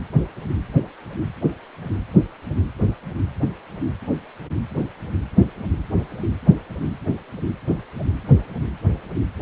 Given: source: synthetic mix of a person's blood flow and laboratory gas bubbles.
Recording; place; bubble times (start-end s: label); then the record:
Doppler ultrasound of blood flow; precordium
no bubbles
From the record:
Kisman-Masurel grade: 000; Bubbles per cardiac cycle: 0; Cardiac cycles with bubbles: 0%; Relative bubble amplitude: no bubbles discernible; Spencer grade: 0 (complete lack of bubble signals)